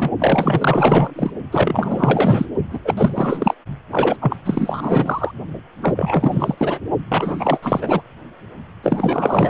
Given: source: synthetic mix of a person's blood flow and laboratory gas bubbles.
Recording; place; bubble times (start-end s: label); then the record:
Doppler ultrasound of blood flow; precordium
0.00-0.10 s: bubbles
0.19-1.31 s: bubbles
1.51-2.46 s: bubbles
2.71-2.79 s: bubbles
2.84-2.94 s: bubbles
2.97-3.54 s: bubbles
3.91-4.17 s: bubbles
4.21-4.36 s: bubbles
4.45-5.32 s: bubbles
5.82-6.55 s: bubbles
6.58-6.79 s: bubbles
7.09-8.02 s: bubbles
8.83-9.50 s: bubbles
From the record:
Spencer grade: 4 (maximum detectable bubble signal sounding continuously throughout systole and diastole of every cardiac period, and overriding the amplitude of the normal cardiac signals); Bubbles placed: only in the low amplitude regions of the cardiac cycle